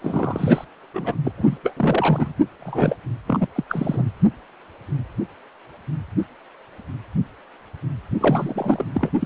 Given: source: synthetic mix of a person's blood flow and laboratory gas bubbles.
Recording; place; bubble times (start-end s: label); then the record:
Doppler ultrasound of blood flow; precordium
0.01-0.65 s: bubbles
0.94-1.16 s: bubbles
1.25-1.32 s: bubbles
1.38-1.58 s: bubbles
1.64-1.74 s: bubbles
1.76-2.33 s: bubbles
2.59-2.96 s: bubbles
3.27-3.46 s: bubbles
3.55-3.64 s: bubbles
3.69-4.04 s: bubbles
8.19-8.84 s: bubbles
8.94-9.09 s: bubbles
9.20-9.25 s: bubbles
From the record:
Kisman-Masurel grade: 332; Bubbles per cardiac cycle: rolling drumbeat, 9 or more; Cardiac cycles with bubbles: 50 to 99%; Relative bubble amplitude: moderate (0.250 to 0.450); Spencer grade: 3 (all of the cardiac periods contain showers or single bubble signals, but not dominating or overriding the cardiac motion signals); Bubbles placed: only in the low amplitude regions of the cardiac cycle